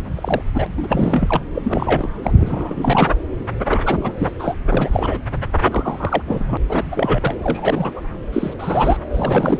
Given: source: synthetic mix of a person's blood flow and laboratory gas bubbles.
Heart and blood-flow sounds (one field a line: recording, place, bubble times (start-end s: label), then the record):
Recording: Doppler ultrasound of blood flow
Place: subclavian vein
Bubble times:
0.15-0.42 s: bubbles
0.53-0.66 s: bubbles
0.77-1.42 s: bubbles
1.54-2.09 s: bubbles
2.22-2.33 s: bubbles
2.38-3.15 s: bubbles
3.65-3.79 s: bubbles
3.85-4.13 s: bubbles
4.18-4.31 s: bubbles
4.39-4.55 s: bubbles
4.71-5.18 s: bubbles
5.63-6.22 s: bubbles
6.27-6.58 s: bubbles
6.69-7.35 s: bubbles
7.43-8.01 s: bubbles
8.33-8.54 s: bubbles
8.59-8.97 s: bubbles
9.14-9.60 s: bubbles
From the record:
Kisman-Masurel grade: 342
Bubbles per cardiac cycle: rolling drumbeat, 9 or more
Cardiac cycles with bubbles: 100%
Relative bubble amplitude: moderate (0.250 to 0.450)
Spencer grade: 3 (all of the cardiac periods contain showers or single bubble signals, but not dominating or overriding the cardiac motion signals)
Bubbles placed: anywhere in the cardiac cycle